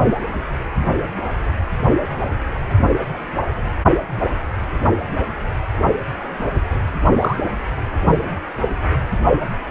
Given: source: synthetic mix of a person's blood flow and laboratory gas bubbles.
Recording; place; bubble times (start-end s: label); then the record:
Doppler ultrasound of blood flow; precordium
7.19-7.37 s: bubbles
8.04-8.13 s: bubbles
From the record:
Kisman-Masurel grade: 113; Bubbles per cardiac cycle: 1 to 2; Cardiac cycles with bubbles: 1 to 10%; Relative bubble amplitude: loud (0.450 to 0.775); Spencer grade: 1 (occasional bubble signal discernible with the cardiac motion signal, with majority of cardiac periods free of bubbles); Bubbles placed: anywhere in the cardiac cycle